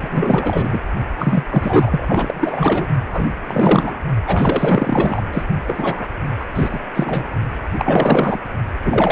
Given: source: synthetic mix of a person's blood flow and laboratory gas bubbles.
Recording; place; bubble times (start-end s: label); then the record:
Doppler ultrasound of blood flow; precordium
0.00-0.80 s: bubbles
1.19-1.44 s: bubbles
1.50-2.88 s: bubbles
3.12-3.28 s: bubbles
3.47-4.01 s: bubbles
4.25-5.22 s: bubbles
5.32-5.43 s: bubbles
5.67-6.05 s: bubbles
6.39-6.46 s: bubbles
6.55-6.79 s: bubbles
6.94-7.26 s: bubbles
7.77-8.39 s: bubbles
8.84-9.12 s: bubbles
From the record:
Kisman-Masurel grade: 444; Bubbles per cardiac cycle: continuous sound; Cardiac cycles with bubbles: 100%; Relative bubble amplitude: maximal (0.775 to 0.999); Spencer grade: 4 (maximum detectable bubble signal sounding continuously throughout systole and diastole of every cardiac period, and overriding the amplitude of the normal cardiac signals); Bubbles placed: only in the low amplitude regions of the cardiac cycle